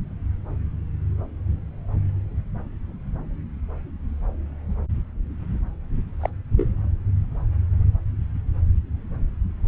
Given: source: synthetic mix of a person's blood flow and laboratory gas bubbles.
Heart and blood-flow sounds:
Doppler ultrasound of blood flow; subclavian vein
6.20-6.29 s: bubbles
6.57-6.69 s: bubbles
From the record:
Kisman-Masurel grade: 112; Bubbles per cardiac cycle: 1 to 2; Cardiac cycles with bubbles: 1 to 10%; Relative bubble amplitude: moderate (0.250 to 0.450); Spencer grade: 1 (occasional bubble signal discernible with the cardiac motion signal, with majority of cardiac periods free of bubbles); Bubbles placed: anywhere in the cardiac cycle

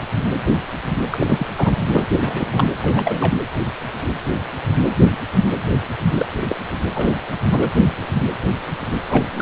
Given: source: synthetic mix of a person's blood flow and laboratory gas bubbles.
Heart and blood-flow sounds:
Doppler ultrasound of blood flow; precordium
1.11-1.48 s: bubbles
1.56-1.74 s: bubbles
1.90-2.06 s: bubbles
2.19-2.65 s: bubbles
2.82-3.38 s: bubbles
6.18-6.26 s: bubbles
6.42-6.55 s: bubbles
6.95-7.18 s: bubbles
7.32-7.38 s: bubbles
7.42-7.71 s: bubbles
9.10-9.42 s: bubbles
From the record:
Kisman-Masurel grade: 222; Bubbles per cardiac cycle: several, 3 to 8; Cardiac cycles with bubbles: 10 to 50%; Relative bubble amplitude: moderate (0.250 to 0.450); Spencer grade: 2 (many but less than half of the cardiac periods contain bubble signals, singularly or in groups); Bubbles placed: anywhere in the cardiac cycle

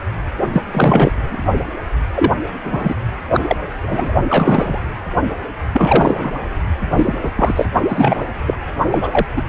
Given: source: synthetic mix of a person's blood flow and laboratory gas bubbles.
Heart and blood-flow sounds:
Doppler ultrasound of blood flow; precordium
0.52-0.65 s: bubbles
0.71-1.12 s: bubbles
1.22-1.39 s: bubbles
2.15-2.31 s: bubbles
2.63-2.95 s: bubbles
3.33-3.40 s: bubbles
3.47-3.56 s: bubbles
3.82-4.12 s: bubbles
4.29-4.80 s: bubbles
5.73-6.31 s: bubbles
6.96-7.30 s: bubbles
7.36-7.66 s: bubbles
7.88-8.24 s: bubbles
8.46-8.54 s: bubbles
8.89-9.07 s: bubbles
9.12-9.26 s: bubbles
9.36-9.42 s: bubbles
From the record:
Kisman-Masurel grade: 243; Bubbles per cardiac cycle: several, 3 to 8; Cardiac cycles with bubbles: 100%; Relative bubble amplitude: loud (0.450 to 0.775); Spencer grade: 3 (all of the cardiac periods contain showers or single bubble signals, but not dominating or overriding the cardiac motion signals); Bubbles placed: only in the low amplitude regions of the cardiac cycle

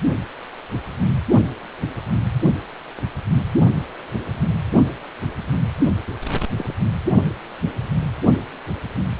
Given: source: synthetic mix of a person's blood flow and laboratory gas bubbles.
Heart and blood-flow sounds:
Doppler ultrasound of blood flow; precordium
6.57-6.74 s: bubbles
From the record:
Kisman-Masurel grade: 111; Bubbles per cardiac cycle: 1 to 2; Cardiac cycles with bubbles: 1 to 10%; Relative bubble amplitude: barely perceptible (0.100 to 0.250); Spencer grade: 1 (occasional bubble signal discernible with the cardiac motion signal, with majority of cardiac periods free of bubbles); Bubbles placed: only in the low amplitude regions of the cardiac cycle

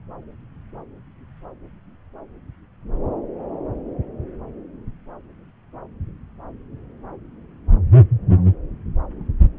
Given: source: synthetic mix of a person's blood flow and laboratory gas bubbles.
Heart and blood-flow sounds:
Doppler ultrasound of blood flow; subclavian vein
no bubbles
From the record:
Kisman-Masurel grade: 000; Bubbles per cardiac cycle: 0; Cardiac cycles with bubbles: 0%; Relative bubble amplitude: no bubbles discernible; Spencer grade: 0 (complete lack of bubble signals)

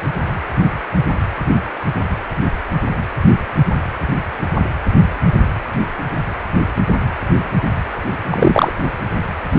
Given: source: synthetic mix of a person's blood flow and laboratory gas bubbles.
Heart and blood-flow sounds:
Doppler ultrasound of blood flow; precordium
8.30-8.73 s: bubbles
From the record:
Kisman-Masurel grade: 113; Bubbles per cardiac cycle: 1 to 2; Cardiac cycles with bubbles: 1 to 10%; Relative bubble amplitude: loud (0.450 to 0.775); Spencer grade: 1 (occasional bubble signal discernible with the cardiac motion signal, with majority of cardiac periods free of bubbles); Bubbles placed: anywhere in the cardiac cycle

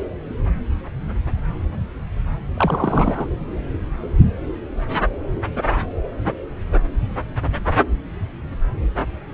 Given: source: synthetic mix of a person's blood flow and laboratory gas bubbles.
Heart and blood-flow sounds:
Doppler ultrasound of blood flow; subclavian vein
2.57-3.27 s: bubbles
From the record:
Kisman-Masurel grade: 212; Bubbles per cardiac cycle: several, 3 to 8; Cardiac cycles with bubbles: 1 to 10%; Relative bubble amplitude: moderate (0.250 to 0.450); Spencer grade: 1 (occasional bubble signal discernible with the cardiac motion signal, with majority of cardiac periods free of bubbles); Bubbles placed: anywhere in the cardiac cycle

